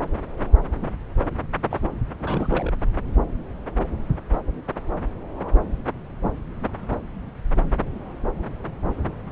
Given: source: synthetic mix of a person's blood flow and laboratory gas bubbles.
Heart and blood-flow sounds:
Doppler ultrasound of blood flow; subclavian vein
1.70-1.79 s: bubbles
2.19-2.73 s: bubbles
From the record:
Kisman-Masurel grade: 211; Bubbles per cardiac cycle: several, 3 to 8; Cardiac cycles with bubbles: 1 to 10%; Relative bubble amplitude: barely perceptible (0.100 to 0.250); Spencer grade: 1 (occasional bubble signal discernible with the cardiac motion signal, with majority of cardiac periods free of bubbles); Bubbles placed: anywhere in the cardiac cycle

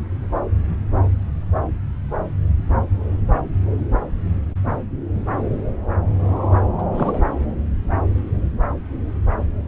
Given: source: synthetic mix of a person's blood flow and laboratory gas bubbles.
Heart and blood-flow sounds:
Doppler ultrasound of blood flow; subclavian vein
6.78-6.83 s: bubbles
6.91-7.20 s: bubbles
From the record:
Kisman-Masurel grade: 212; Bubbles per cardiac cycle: several, 3 to 8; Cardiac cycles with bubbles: 1 to 10%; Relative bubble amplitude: moderate (0.250 to 0.450); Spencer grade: 1 (occasional bubble signal discernible with the cardiac motion signal, with majority of cardiac periods free of bubbles); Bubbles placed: anywhere in the cardiac cycle

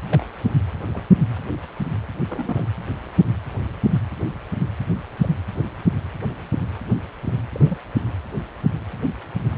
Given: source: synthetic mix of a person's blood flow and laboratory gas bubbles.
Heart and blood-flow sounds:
Doppler ultrasound of blood flow; precordium
0.08-0.26 s: bubbles
0.39-0.53 s: bubbles
0.93-1.02 s: bubbles
2.28-2.63 s: bubbles
5.22-5.29 s: bubbles
7.25-7.33 s: bubbles
7.52-7.78 s: bubbles
From the record:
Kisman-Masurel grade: 121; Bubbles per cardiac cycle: 1 to 2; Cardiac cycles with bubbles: 10 to 50%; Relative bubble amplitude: barely perceptible (0.100 to 0.250); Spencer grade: 2 (many but less than half of the cardiac periods contain bubble signals, singularly or in groups); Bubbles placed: anywhere in the cardiac cycle

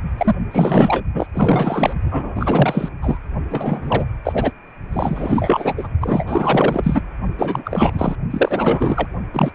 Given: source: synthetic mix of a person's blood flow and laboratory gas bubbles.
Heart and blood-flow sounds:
Doppler ultrasound of blood flow; precordium
0.17-0.35 s: bubbles
0.51-1.03 s: bubbles
1.14-1.27 s: bubbles
1.33-1.93 s: bubbles
2.10-2.88 s: bubbles
3.02-3.19 s: bubbles
3.50-4.05 s: bubbles
4.24-4.53 s: bubbles
4.92-5.75 s: bubbles
5.77-5.88 s: bubbles
6.00-6.24 s: bubbles
6.26-7.01 s: bubbles
7.38-8.15 s: bubbles
8.30-9.07 s: bubbles
9.33-9.51 s: bubbles
From the record:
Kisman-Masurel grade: 444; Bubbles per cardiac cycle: continuous sound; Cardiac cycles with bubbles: 100%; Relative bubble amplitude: maximal (0.775 to 0.999); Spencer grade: 4 (maximum detectable bubble signal sounding continuously throughout systole and diastole of every cardiac period, and overriding the amplitude of the normal cardiac signals); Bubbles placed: only in the low amplitude regions of the cardiac cycle

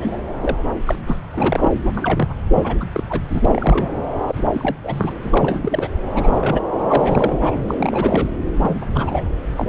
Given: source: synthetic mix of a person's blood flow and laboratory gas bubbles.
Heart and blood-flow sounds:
Doppler ultrasound of blood flow; subclavian vein
0.00-0.17 s: bubbles
0.40-0.57 s: bubbles
0.86-0.97 s: bubbles
1.06-1.19 s: bubbles
1.32-1.72 s: bubbles
1.75-1.80 s: bubbles
1.95-2.28 s: bubbles
2.54-2.75 s: bubbles
2.80-2.87 s: bubbles
2.92-3.03 s: bubbles
3.09-3.21 s: bubbles
3.29-3.41 s: bubbles
3.45-3.90 s: bubbles
4.26-4.45 s: bubbles
4.53-4.76 s: bubbles
4.83-5.14 s: bubbles
5.24-5.88 s: bubbles
6.15-6.61 s: bubbles
6.90-7.64 s: bubbles
7.68-7.75 s: bubbles
7.78-8.30 s: bubbles
8.58-8.86 s: bubbles
8.94-9.24 s: bubbles
9.56-9.69 s: bubbles
From the record:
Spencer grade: 3 (all of the cardiac periods contain showers or single bubble signals, but not dominating or overriding the cardiac motion signals); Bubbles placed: anywhere in the cardiac cycle

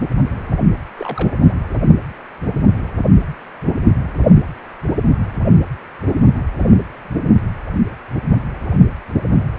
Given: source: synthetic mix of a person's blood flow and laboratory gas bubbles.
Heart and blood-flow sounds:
Doppler ultrasound of blood flow; precordium
0.97-1.41 s: bubbles
From the record:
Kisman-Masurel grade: 111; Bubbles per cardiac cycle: 1 to 2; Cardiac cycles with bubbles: 1 to 10%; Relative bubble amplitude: barely perceptible (0.100 to 0.250); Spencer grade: 1 (occasional bubble signal discernible with the cardiac motion signal, with majority of cardiac periods free of bubbles); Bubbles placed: anywhere in the cardiac cycle

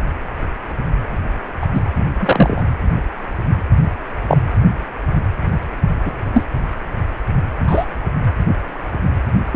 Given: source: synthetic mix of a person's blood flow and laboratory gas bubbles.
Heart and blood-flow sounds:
Doppler ultrasound of blood flow; precordium
1.61-1.67 s: bubbles
1.74-1.80 s: bubbles
2.19-2.63 s: bubbles
4.27-4.38 s: bubbles
6.05-6.11 s: bubbles
6.33-6.44 s: bubbles
7.67-7.85 s: bubbles
9.53-9.56 s: bubbles
From the record:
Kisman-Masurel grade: 123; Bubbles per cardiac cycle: 1 to 2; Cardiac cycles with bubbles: 10 to 50%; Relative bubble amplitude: loud (0.450 to 0.775); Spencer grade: 2 (many but less than half of the cardiac periods contain bubble signals, singularly or in groups); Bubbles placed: anywhere in the cardiac cycle

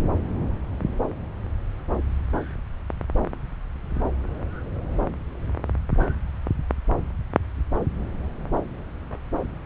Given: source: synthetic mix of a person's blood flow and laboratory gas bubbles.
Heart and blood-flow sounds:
Doppler ultrasound of blood flow; subclavian vein
no bubbles
From the record:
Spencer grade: 0 (complete lack of bubble signals)

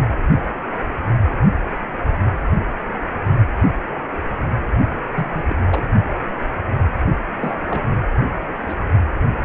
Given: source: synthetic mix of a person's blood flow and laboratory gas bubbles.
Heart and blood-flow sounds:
Doppler ultrasound of blood flow; precordium
0.00-0.03 s: bubbles
5.14-5.44 s: bubbles
5.50-5.55 s: bubbles
5.71-5.87 s: bubbles
7.39-7.58 s: bubbles
7.69-7.82 s: bubbles
8.69-8.75 s: bubbles
From the record:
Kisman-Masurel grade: 221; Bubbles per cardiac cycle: several, 3 to 8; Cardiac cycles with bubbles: 10 to 50%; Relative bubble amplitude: barely perceptible (0.100 to 0.250); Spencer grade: 2 (many but less than half of the cardiac periods contain bubble signals, singularly or in groups); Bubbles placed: only in the low amplitude regions of the cardiac cycle

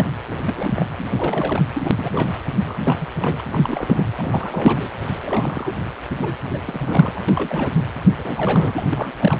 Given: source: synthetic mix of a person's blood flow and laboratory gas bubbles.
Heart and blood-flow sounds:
Doppler ultrasound of blood flow; precordium
0.00-0.16 s: bubbles
0.27-0.36 s: bubbles
0.40-0.85 s: bubbles
0.98-1.05 s: bubbles
1.17-1.64 s: bubbles
1.75-2.36 s: bubbles
2.57-2.97 s: bubbles
3.00-3.07 s: bubbles
3.18-3.41 s: bubbles
3.52-4.03 s: bubbles
4.17-4.89 s: bubbles
5.19-5.76 s: bubbles
6.21-6.34 s: bubbles
6.50-6.60 s: bubbles
6.65-7.25 s: bubbles
7.28-7.73 s: bubbles
8.16-8.87 s: bubbles
8.91-9.12 s: bubbles
9.19-9.40 s: bubbles
From the record:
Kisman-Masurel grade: 342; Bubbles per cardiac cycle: rolling drumbeat, 9 or more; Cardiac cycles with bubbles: 100%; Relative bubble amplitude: moderate (0.250 to 0.450); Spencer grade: 3 (all of the cardiac periods contain showers or single bubble signals, but not dominating or overriding the cardiac motion signals); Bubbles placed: anywhere in the cardiac cycle

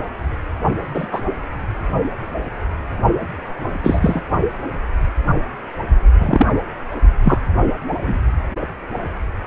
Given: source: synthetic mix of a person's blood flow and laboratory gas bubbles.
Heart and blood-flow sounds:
Doppler ultrasound of blood flow; precordium
0.94-1.06 s: bubbles
1.12-1.21 s: bubbles
3.84-4.21 s: bubbles
6.19-6.46 s: bubbles
7.24-7.38 s: bubbles
8.02-8.18 s: bubbles
From the record:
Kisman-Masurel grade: 123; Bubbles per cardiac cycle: 1 to 2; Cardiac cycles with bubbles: 10 to 50%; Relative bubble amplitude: loud (0.450 to 0.775); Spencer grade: 2 (many but less than half of the cardiac periods contain bubble signals, singularly or in groups); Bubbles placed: only in the low amplitude regions of the cardiac cycle

